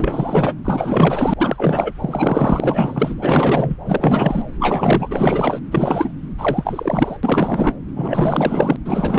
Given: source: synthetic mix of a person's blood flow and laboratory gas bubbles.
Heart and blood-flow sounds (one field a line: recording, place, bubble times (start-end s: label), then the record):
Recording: Doppler ultrasound of blood flow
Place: subclavian vein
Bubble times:
0.00-0.54 s: bubbles
0.65-1.33 s: bubbles
1.37-1.93 s: bubbles
1.99-3.15 s: bubbles
3.22-3.75 s: bubbles
3.84-4.49 s: bubbles
4.59-5.59 s: bubbles
5.71-6.12 s: bubbles
6.38-7.17 s: bubbles
7.23-7.73 s: bubbles
7.96-8.76 s: bubbles
8.85-9.19 s: bubbles
From the record:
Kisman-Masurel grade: 444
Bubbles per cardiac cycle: continuous sound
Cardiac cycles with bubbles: 100%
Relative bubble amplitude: maximal (0.775 to 0.999)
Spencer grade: 4 (maximum detectable bubble signal sounding continuously throughout systole and diastole of every cardiac period, and overriding the amplitude of the normal cardiac signals)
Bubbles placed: anywhere in the cardiac cycle